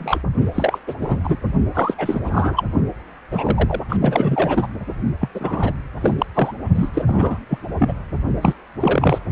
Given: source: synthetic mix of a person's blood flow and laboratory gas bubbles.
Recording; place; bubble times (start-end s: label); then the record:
Doppler ultrasound of blood flow; precordium
0.00-0.21 s: bubbles
0.54-0.79 s: bubbles
0.87-0.94 s: bubbles
1.01-1.18 s: bubbles
1.24-1.37 s: bubbles
1.74-1.95 s: bubbles
1.97-2.65 s: bubbles
3.31-3.80 s: bubbles
3.88-3.97 s: bubbles
4.01-4.67 s: bubbles
5.21-5.29 s: bubbles
5.34-5.72 s: bubbles
6.01-6.14 s: bubbles
6.18-6.26 s: bubbles
6.34-6.52 s: bubbles
6.75-6.89 s: bubbles
6.93-7.04 s: bubbles
7.06-7.39 s: bubbles
7.49-7.58 s: bubbles
7.77-7.95 s: bubbles
8.41-8.54 s: bubbles
8.80-9.19 s: bubbles
From the record:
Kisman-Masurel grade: 343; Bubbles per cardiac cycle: rolling drumbeat, 9 or more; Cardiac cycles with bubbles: 100%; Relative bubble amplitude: loud (0.450 to 0.775); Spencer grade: 3 (all of the cardiac periods contain showers or single bubble signals, but not dominating or overriding the cardiac motion signals); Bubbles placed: only in the low amplitude regions of the cardiac cycle